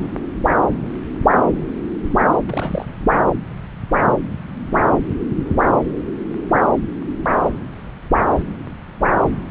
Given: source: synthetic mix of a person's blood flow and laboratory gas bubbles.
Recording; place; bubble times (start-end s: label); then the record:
Doppler ultrasound of blood flow; subclavian vein
2.46-3.06 s: bubbles
3.12-3.18 s: bubbles
From the record:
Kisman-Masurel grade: 211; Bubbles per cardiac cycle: several, 3 to 8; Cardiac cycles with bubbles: 1 to 10%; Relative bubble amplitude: barely perceptible (0.100 to 0.250); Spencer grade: 1 (occasional bubble signal discernible with the cardiac motion signal, with majority of cardiac periods free of bubbles); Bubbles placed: anywhere in the cardiac cycle